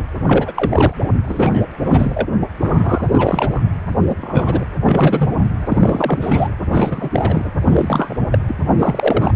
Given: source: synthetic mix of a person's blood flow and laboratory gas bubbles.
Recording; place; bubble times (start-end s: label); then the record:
Doppler ultrasound of blood flow; precordium
0.00-0.03 s: bubbles
0.23-0.94 s: bubbles
1.23-1.62 s: bubbles
1.84-2.27 s: bubbles
2.59-3.61 s: bubbles
4.00-4.15 s: bubbles
4.22-4.67 s: bubbles
4.71-5.29 s: bubbles
5.40-5.45 s: bubbles
5.61-6.48 s: bubbles
6.68-7.51 s: bubbles
7.64-8.19 s: bubbles
8.31-8.38 s: bubbles
8.47-8.56 s: bubbles
8.78-9.34 s: bubbles
From the record:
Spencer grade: 3 (all of the cardiac periods contain showers or single bubble signals, but not dominating or overriding the cardiac motion signals); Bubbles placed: anywhere in the cardiac cycle